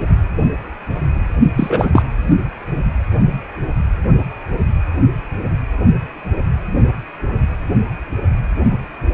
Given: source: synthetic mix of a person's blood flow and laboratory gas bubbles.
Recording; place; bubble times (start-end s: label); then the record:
Doppler ultrasound of blood flow; precordium
1.56-1.90 s: bubbles
1.92-2.02 s: bubbles
From the record:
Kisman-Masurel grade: 213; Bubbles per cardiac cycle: several, 3 to 8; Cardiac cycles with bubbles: 1 to 10%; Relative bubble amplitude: loud (0.450 to 0.775); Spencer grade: 1 (occasional bubble signal discernible with the cardiac motion signal, with majority of cardiac periods free of bubbles); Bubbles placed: anywhere in the cardiac cycle